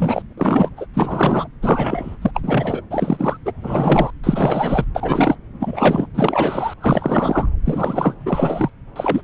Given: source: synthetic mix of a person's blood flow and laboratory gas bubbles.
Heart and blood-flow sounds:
Doppler ultrasound of blood flow; subclavian vein
0.00-0.22 s: bubbles
0.37-0.70 s: bubbles
0.76-0.85 s: bubbles
0.94-1.48 s: bubbles
1.62-2.17 s: bubbles
2.21-2.31 s: bubbles
2.34-2.81 s: bubbles
2.91-3.37 s: bubbles
3.45-3.52 s: bubbles
3.62-4.10 s: bubbles
4.23-4.85 s: bubbles
4.94-5.36 s: bubbles
5.60-6.06 s: bubbles
6.14-6.74 s: bubbles
6.80-7.46 s: bubbles
7.65-8.16 s: bubbles
8.25-8.70 s: bubbles
8.96-9.21 s: bubbles
From the record:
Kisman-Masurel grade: 343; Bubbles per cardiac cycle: rolling drumbeat, 9 or more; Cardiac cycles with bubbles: 100%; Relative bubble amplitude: loud (0.450 to 0.775); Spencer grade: 3 (all of the cardiac periods contain showers or single bubble signals, but not dominating or overriding the cardiac motion signals); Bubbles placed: anywhere in the cardiac cycle

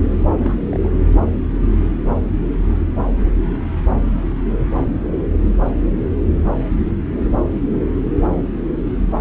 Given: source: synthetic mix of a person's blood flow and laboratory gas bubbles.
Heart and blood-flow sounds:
Doppler ultrasound of blood flow; subclavian vein
0.28-0.68 s: bubbles
0.71-0.88 s: bubbles
From the record:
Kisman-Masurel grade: 221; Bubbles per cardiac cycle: several, 3 to 8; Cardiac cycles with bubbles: 10 to 50%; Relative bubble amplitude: barely perceptible (0.100 to 0.250); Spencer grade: 2 (many but less than half of the cardiac periods contain bubble signals, singularly or in groups); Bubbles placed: anywhere in the cardiac cycle

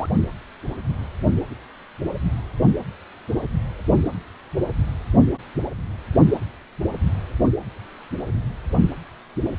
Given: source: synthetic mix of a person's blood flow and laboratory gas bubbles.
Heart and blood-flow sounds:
Doppler ultrasound of blood flow; precordium
0.00-0.06 s: bubbles
From the record:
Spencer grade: 1 (occasional bubble signal discernible with the cardiac motion signal, with majority of cardiac periods free of bubbles); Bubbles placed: only in the low amplitude regions of the cardiac cycle

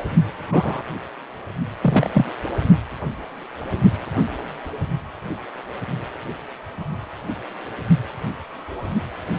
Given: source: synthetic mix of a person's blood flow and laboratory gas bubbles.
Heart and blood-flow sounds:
Doppler ultrasound of blood flow; precordium
0.49-0.82 s: bubbles
1.81-2.08 s: bubbles
2.13-2.32 s: bubbles
From the record:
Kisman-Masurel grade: 123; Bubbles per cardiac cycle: 1 to 2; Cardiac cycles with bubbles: 10 to 50%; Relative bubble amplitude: loud (0.450 to 0.775); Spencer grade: 2 (many but less than half of the cardiac periods contain bubble signals, singularly or in groups); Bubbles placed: only in the low amplitude regions of the cardiac cycle

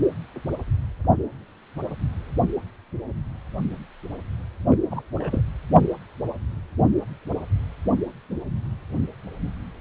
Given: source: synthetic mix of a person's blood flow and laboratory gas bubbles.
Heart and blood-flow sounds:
Doppler ultrasound of blood flow; precordium
4.70-4.77 s: bubbles
4.91-5.02 s: bubbles
5.13-5.42 s: bubbles
From the record:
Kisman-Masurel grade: 211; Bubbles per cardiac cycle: several, 3 to 8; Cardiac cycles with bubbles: 1 to 10%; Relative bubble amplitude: barely perceptible (0.100 to 0.250); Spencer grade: 1 (occasional bubble signal discernible with the cardiac motion signal, with majority of cardiac periods free of bubbles); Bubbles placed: only in the low amplitude regions of the cardiac cycle

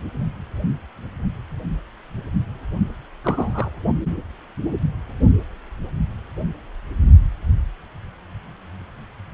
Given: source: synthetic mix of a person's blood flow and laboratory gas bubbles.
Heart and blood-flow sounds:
Doppler ultrasound of blood flow; precordium
3.24-3.70 s: bubbles
From the record:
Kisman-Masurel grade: 112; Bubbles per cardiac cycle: 1 to 2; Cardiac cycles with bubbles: 1 to 10%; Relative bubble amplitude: moderate (0.250 to 0.450); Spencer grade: 1 (occasional bubble signal discernible with the cardiac motion signal, with majority of cardiac periods free of bubbles); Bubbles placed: only in the low amplitude regions of the cardiac cycle

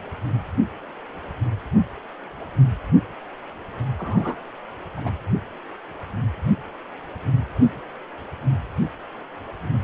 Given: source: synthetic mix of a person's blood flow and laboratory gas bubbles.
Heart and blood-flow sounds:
Doppler ultrasound of blood flow; precordium
3.98-4.35 s: bubbles
4.96-5.10 s: bubbles
From the record:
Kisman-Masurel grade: 112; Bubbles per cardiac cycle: 1 to 2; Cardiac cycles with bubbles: 1 to 10%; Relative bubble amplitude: moderate (0.250 to 0.450); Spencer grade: 1 (occasional bubble signal discernible with the cardiac motion signal, with majority of cardiac periods free of bubbles); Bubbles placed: anywhere in the cardiac cycle

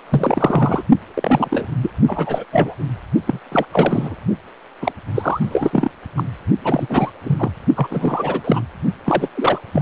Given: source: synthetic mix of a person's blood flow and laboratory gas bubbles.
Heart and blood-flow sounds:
Doppler ultrasound of blood flow; precordium
0.09-0.83 s: bubbles
1.14-1.67 s: bubbles
1.82-1.91 s: bubbles
2.07-2.45 s: bubbles
2.52-2.74 s: bubbles
3.26-3.40 s: bubbles
3.52-3.65 s: bubbles
3.72-4.15 s: bubbles
4.81-4.92 s: bubbles
5.14-5.92 s: bubbles
6.17-6.23 s: bubbles
6.62-7.10 s: bubbles
7.23-7.52 s: bubbles
7.76-7.88 s: bubbles
7.90-8.41 s: bubbles
8.44-8.62 s: bubbles
9.05-9.29 s: bubbles
9.35-9.59 s: bubbles
9.73-9.82 s: bubbles
From the record:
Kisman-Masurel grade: 343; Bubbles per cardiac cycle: rolling drumbeat, 9 or more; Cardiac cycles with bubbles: 100%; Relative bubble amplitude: loud (0.450 to 0.775); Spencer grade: 3 (all of the cardiac periods contain showers or single bubble signals, but not dominating or overriding the cardiac motion signals); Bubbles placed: only in the low amplitude regions of the cardiac cycle

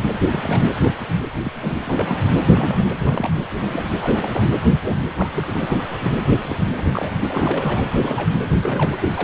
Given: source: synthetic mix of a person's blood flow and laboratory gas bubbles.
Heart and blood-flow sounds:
Doppler ultrasound of blood flow; precordium
0.00-0.08 s: bubbles
0.31-0.62 s: bubbles
0.82-0.95 s: bubbles
1.43-1.52 s: bubbles
1.61-1.77 s: bubbles
1.86-2.23 s: bubbles
2.41-2.88 s: bubbles
3.01-3.30 s: bubbles
3.51-3.84 s: bubbles
4.01-4.49 s: bubbles
4.81-5.51 s: bubbles
5.54-6.12 s: bubbles
6.18-6.66 s: bubbles
6.76-6.87 s: bubbles
6.92-7.82 s: bubbles
7.98-8.34 s: bubbles
8.62-8.98 s: bubbles
9.01-9.12 s: bubbles
9.16-9.24 s: bubbles
From the record:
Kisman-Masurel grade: 242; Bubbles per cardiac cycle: several, 3 to 8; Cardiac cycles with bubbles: 100%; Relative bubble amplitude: moderate (0.250 to 0.450); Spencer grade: 3 (all of the cardiac periods contain showers or single bubble signals, but not dominating or overriding the cardiac motion signals); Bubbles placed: anywhere in the cardiac cycle

